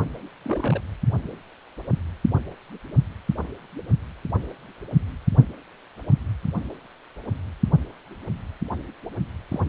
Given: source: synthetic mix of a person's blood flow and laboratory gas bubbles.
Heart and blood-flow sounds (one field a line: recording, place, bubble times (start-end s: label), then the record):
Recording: Doppler ultrasound of blood flow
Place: precordium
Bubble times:
0.45-0.82 s: bubbles
9.51-9.60 s: bubbles
From the record:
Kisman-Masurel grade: 121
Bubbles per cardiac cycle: 1 to 2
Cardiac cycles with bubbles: 10 to 50%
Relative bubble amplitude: barely perceptible (0.100 to 0.250)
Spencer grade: 2 (many but less than half of the cardiac periods contain bubble signals, singularly or in groups)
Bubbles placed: only in the low amplitude regions of the cardiac cycle